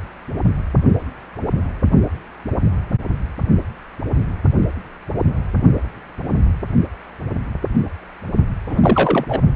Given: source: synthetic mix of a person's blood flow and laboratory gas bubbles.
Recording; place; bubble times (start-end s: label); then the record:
Doppler ultrasound of blood flow; precordium
8.70-9.25 s: bubbles
9.28-9.42 s: bubbles
From the record:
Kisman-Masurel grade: 213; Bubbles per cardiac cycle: several, 3 to 8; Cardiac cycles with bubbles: 1 to 10%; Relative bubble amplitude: loud (0.450 to 0.775); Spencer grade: 1 (occasional bubble signal discernible with the cardiac motion signal, with majority of cardiac periods free of bubbles); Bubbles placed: only in the low amplitude regions of the cardiac cycle